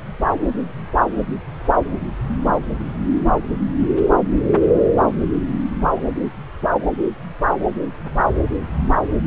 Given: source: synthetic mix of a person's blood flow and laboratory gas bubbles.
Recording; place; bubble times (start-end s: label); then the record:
Doppler ultrasound of blood flow; subclavian vein
5.96-6.01 s: bubbles
From the record:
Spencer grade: 2 (many but less than half of the cardiac periods contain bubble signals, singularly or in groups); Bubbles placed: anywhere in the cardiac cycle